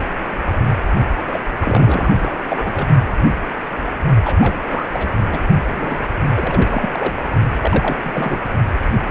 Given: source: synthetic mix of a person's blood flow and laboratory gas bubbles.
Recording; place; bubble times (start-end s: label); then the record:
Doppler ultrasound of blood flow; precordium
1.27-1.40 s: bubbles
1.60-2.40 s: bubbles
2.48-2.87 s: bubbles
4.23-4.36 s: bubbles
4.40-4.62 s: bubbles
4.67-4.85 s: bubbles
4.92-5.08 s: bubbles
5.12-5.20 s: bubbles
5.30-5.40 s: bubbles
5.72-6.00 s: bubbles
6.34-7.23 s: bubbles
7.61-7.96 s: bubbles
8.03-8.39 s: bubbles
From the record:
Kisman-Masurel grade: 332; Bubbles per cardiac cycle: rolling drumbeat, 9 or more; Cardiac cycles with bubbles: 50 to 99%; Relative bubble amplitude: moderate (0.250 to 0.450); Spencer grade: 3 (all of the cardiac periods contain showers or single bubble signals, but not dominating or overriding the cardiac motion signals); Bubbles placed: only in the low amplitude regions of the cardiac cycle